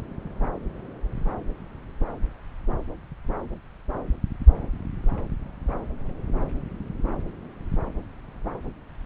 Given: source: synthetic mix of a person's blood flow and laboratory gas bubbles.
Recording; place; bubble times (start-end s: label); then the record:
Doppler ultrasound of blood flow; subclavian vein
no bubbles
From the record:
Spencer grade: 0 (complete lack of bubble signals)